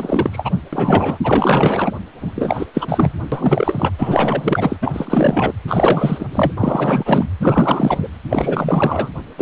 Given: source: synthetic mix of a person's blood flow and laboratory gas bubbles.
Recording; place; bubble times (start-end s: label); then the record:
Doppler ultrasound of blood flow; precordium
0.00-0.51 s: bubbles
0.73-1.18 s: bubbles
1.23-1.92 s: bubbles
2.19-2.67 s: bubbles
2.74-3.12 s: bubbles
3.31-3.90 s: bubbles
3.98-4.76 s: bubbles
4.82-5.54 s: bubbles
5.67-6.26 s: bubbles
6.32-6.52 s: bubbles
6.57-7.28 s: bubbles
7.40-8.08 s: bubbles
8.29-9.10 s: bubbles
9.14-9.17 s: bubbles
9.38-9.42 s: bubbles
From the record:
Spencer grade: 4 (maximum detectable bubble signal sounding continuously throughout systole and diastole of every cardiac period, and overriding the amplitude of the normal cardiac signals); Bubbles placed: anywhere in the cardiac cycle